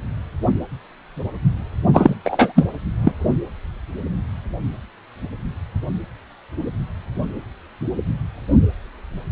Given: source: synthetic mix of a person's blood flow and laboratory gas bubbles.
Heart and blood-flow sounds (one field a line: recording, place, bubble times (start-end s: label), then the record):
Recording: Doppler ultrasound of blood flow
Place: precordium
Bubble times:
1.93-2.16 s: bubbles
2.24-2.53 s: bubbles
2.55-2.66 s: bubbles
3.02-3.12 s: bubbles
From the record:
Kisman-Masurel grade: 213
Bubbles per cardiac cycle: several, 3 to 8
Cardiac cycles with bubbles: 1 to 10%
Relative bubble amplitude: loud (0.450 to 0.775)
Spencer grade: 1 (occasional bubble signal discernible with the cardiac motion signal, with majority of cardiac periods free of bubbles)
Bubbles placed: anywhere in the cardiac cycle